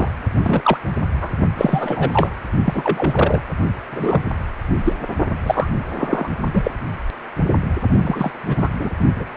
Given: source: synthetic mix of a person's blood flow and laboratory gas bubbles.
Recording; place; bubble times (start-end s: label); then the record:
Doppler ultrasound of blood flow; precordium
0.00-0.10 s: bubbles
0.43-0.78 s: bubbles
1.10-1.32 s: bubbles
1.56-2.37 s: bubbles
2.65-3.41 s: bubbles
3.91-4.22 s: bubbles
4.84-4.95 s: bubbles
5.38-5.71 s: bubbles
5.96-6.29 s: bubbles
6.54-6.71 s: bubbles
8.01-8.32 s: bubbles
8.47-8.69 s: bubbles
8.79-8.90 s: bubbles
9.15-9.24 s: bubbles
From the record:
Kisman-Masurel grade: 243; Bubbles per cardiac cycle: several, 3 to 8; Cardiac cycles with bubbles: 100%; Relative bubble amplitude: loud (0.450 to 0.775); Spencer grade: 3 (all of the cardiac periods contain showers or single bubble signals, but not dominating or overriding the cardiac motion signals); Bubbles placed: only in the low amplitude regions of the cardiac cycle